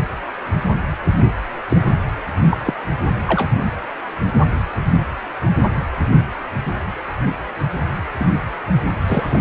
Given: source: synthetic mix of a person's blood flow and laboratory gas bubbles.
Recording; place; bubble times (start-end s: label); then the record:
Doppler ultrasound of blood flow; precordium
1.69-1.94 s: bubbles
2.50-2.57 s: bubbles
2.63-2.74 s: bubbles
3.27-3.48 s: bubbles
8.19-8.26 s: bubbles
9.06-9.41 s: bubbles
From the record:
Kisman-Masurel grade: 122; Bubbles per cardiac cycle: 1 to 2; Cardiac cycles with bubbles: 10 to 50%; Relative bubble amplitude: moderate (0.250 to 0.450); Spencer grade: 2 (many but less than half of the cardiac periods contain bubble signals, singularly or in groups); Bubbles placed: anywhere in the cardiac cycle